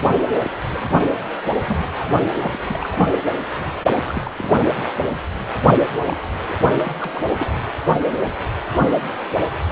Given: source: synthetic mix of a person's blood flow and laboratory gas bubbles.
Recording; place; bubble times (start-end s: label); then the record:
Doppler ultrasound of blood flow; precordium
0.31-0.51 s: bubbles
0.68-0.86 s: bubbles
0.93-1.10 s: bubbles
1.66-2.15 s: bubbles
2.33-2.58 s: bubbles
2.67-3.12 s: bubbles
3.92-4.04 s: bubbles
4.06-4.31 s: bubbles
4.38-4.62 s: bubbles
6.04-6.17 s: bubbles
6.48-6.54 s: bubbles
6.81-6.92 s: bubbles
7.00-7.10 s: bubbles
7.13-7.21 s: bubbles
7.34-7.47 s: bubbles
From the record:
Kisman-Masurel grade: 221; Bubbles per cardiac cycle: several, 3 to 8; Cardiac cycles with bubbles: 10 to 50%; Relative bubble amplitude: barely perceptible (0.100 to 0.250); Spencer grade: 2 (many but less than half of the cardiac periods contain bubble signals, singularly or in groups); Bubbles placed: anywhere in the cardiac cycle